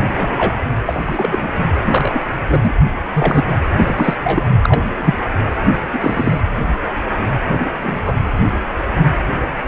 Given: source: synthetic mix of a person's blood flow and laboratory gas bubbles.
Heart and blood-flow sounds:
Doppler ultrasound of blood flow; precordium
0.14-0.57 s: bubbles
0.85-1.49 s: bubbles
1.85-2.20 s: bubbles
2.47-2.75 s: bubbles
3.13-3.44 s: bubbles
3.71-4.15 s: bubbles
4.23-4.48 s: bubbles
4.62-4.82 s: bubbles
4.98-5.14 s: bubbles
5.64-5.75 s: bubbles
5.93-6.41 s: bubbles
7.83-7.96 s: bubbles
8.04-8.15 s: bubbles
From the record:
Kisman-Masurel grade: 233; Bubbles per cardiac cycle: several, 3 to 8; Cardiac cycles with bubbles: 50 to 99%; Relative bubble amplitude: loud (0.450 to 0.775); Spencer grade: 3 (all of the cardiac periods contain showers or single bubble signals, but not dominating or overriding the cardiac motion signals); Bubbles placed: anywhere in the cardiac cycle

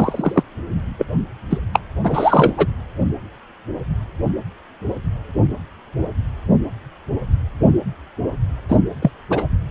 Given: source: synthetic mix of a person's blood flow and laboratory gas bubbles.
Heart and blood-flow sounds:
Doppler ultrasound of blood flow; precordium
0.00-0.44 s: bubbles
0.99-1.05 s: bubbles
1.50-1.60 s: bubbles
1.73-1.79 s: bubbles
2.04-2.52 s: bubbles
2.57-2.67 s: bubbles
8.69-8.78 s: bubbles
9.02-9.11 s: bubbles
9.30-9.46 s: bubbles
From the record:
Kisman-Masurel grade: 223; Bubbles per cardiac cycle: several, 3 to 8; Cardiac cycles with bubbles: 10 to 50%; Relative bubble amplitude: loud (0.450 to 0.775); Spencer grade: 2 (many but less than half of the cardiac periods contain bubble signals, singularly or in groups); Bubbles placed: anywhere in the cardiac cycle

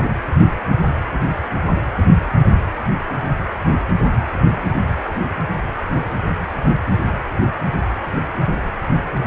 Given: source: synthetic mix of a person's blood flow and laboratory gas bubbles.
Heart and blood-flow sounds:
Doppler ultrasound of blood flow; precordium
0.00-0.09 s: bubbles
From the record:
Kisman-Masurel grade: 213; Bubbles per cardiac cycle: several, 3 to 8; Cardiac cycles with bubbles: 1 to 10%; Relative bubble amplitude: loud (0.450 to 0.775); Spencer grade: 1 (occasional bubble signal discernible with the cardiac motion signal, with majority of cardiac periods free of bubbles); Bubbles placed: anywhere in the cardiac cycle

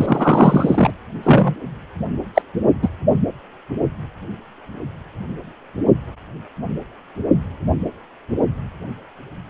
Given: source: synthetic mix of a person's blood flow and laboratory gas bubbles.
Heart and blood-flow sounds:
Doppler ultrasound of blood flow; precordium
0.00-0.91 s: bubbles
1.23-1.54 s: bubbles
2.35-2.42 s: bubbles
2.82-2.89 s: bubbles
From the record:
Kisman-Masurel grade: 223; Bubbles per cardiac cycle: several, 3 to 8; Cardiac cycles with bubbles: 10 to 50%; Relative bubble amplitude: loud (0.450 to 0.775); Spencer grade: 2 (many but less than half of the cardiac periods contain bubble signals, singularly or in groups); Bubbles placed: only in the low amplitude regions of the cardiac cycle

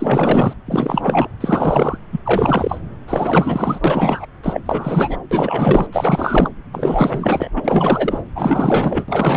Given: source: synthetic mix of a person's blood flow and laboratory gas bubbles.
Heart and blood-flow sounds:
Doppler ultrasound of blood flow; subclavian vein
0.00-0.53 s: bubbles
0.66-1.28 s: bubbles
1.41-1.98 s: bubbles
2.12-2.20 s: bubbles
2.25-2.81 s: bubbles
3.07-3.79 s: bubbles
3.84-4.25 s: bubbles
4.43-4.60 s: bubbles
4.65-5.17 s: bubbles
5.31-5.88 s: bubbles
5.92-6.49 s: bubbles
6.72-7.49 s: bubbles
7.55-8.23 s: bubbles
8.35-9.04 s: bubbles
9.08-9.37 s: bubbles
From the record:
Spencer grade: 4 (maximum detectable bubble signal sounding continuously throughout systole and diastole of every cardiac period, and overriding the amplitude of the normal cardiac signals); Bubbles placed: anywhere in the cardiac cycle

